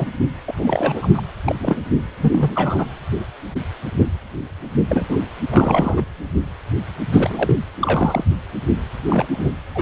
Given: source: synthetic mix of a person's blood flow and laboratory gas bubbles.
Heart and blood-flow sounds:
Doppler ultrasound of blood flow; precordium
0.00-0.07 s: bubbles
0.45-1.10 s: bubbles
1.14-1.22 s: bubbles
1.46-1.55 s: bubbles
1.59-1.80 s: bubbles
2.20-2.87 s: bubbles
4.88-5.17 s: bubbles
5.50-6.04 s: bubbles
7.12-7.56 s: bubbles
7.82-8.24 s: bubbles
9.09-9.26 s: bubbles
9.32-9.50 s: bubbles
9.75-9.82 s: bubbles
From the record:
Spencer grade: 3 (all of the cardiac periods contain showers or single bubble signals, but not dominating or overriding the cardiac motion signals); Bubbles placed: anywhere in the cardiac cycle

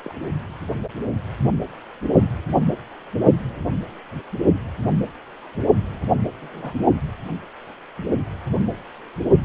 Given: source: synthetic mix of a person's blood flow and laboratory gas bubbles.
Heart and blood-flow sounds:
Doppler ultrasound of blood flow; precordium
0.04-0.12 s: bubbles
6.41-6.73 s: bubbles
From the record:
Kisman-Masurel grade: 121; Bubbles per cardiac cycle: 1 to 2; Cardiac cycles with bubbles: 10 to 50%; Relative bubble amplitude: barely perceptible (0.100 to 0.250); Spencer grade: 2 (many but less than half of the cardiac periods contain bubble signals, singularly or in groups); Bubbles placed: only in the low amplitude regions of the cardiac cycle

